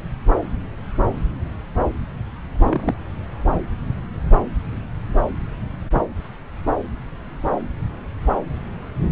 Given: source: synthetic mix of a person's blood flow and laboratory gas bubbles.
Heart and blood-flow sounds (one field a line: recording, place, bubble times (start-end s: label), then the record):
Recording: Doppler ultrasound of blood flow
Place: subclavian vein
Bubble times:
2.59-2.94 s: bubbles
From the record:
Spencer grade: 2 (many but less than half of the cardiac periods contain bubble signals, singularly or in groups)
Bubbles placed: anywhere in the cardiac cycle